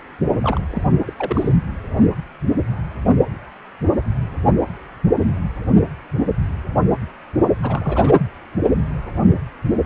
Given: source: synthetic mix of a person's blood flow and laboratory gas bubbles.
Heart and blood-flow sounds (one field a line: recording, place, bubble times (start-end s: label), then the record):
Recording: Doppler ultrasound of blood flow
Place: precordium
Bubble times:
0.42-0.61 s: bubbles
0.70-0.83 s: bubbles
1.05-1.13 s: bubbles
1.18-1.56 s: bubbles
7.59-8.14 s: bubbles
From the record:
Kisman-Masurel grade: 221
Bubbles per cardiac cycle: several, 3 to 8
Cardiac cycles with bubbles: 10 to 50%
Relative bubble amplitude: barely perceptible (0.100 to 0.250)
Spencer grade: 2 (many but less than half of the cardiac periods contain bubble signals, singularly or in groups)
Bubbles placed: anywhere in the cardiac cycle